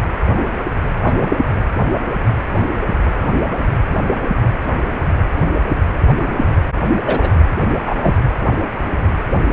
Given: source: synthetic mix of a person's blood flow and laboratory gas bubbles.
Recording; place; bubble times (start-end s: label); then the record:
Doppler ultrasound of blood flow; precordium
1.03-1.36 s: bubbles
7.06-7.29 s: bubbles
7.79-8.14 s: bubbles
From the record:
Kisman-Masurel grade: 123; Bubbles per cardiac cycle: 1 to 2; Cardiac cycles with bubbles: 10 to 50%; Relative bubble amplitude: loud (0.450 to 0.775); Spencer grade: 2 (many but less than half of the cardiac periods contain bubble signals, singularly or in groups); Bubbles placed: anywhere in the cardiac cycle